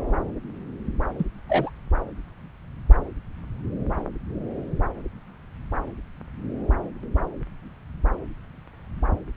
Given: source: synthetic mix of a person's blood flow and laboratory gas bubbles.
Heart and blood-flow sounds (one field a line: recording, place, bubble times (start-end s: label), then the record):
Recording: Doppler ultrasound of blood flow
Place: subclavian vein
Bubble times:
1.18-1.24 s: bubbles
1.49-1.70 s: bubbles
From the record:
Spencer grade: 1 (occasional bubble signal discernible with the cardiac motion signal, with majority of cardiac periods free of bubbles)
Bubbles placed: anywhere in the cardiac cycle